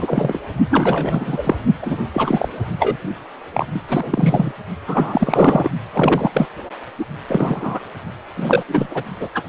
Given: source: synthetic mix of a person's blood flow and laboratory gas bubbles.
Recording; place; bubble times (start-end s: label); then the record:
Doppler ultrasound of blood flow; precordium
0.00-0.41 s: bubbles
0.70-1.56 s: bubbles
1.82-1.99 s: bubbles
2.13-2.48 s: bubbles
2.79-2.97 s: bubbles
3.53-3.67 s: bubbles
3.73-3.80 s: bubbles
3.88-4.52 s: bubbles
4.87-5.70 s: bubbles
5.92-6.46 s: bubbles
6.99-7.05 s: bubbles
7.27-7.79 s: bubbles
8.36-8.64 s: bubbles
8.68-9.03 s: bubbles
9.20-9.29 s: bubbles
9.35-9.43 s: bubbles
From the record:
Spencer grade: 3 (all of the cardiac periods contain showers or single bubble signals, but not dominating or overriding the cardiac motion signals); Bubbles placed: only in the low amplitude regions of the cardiac cycle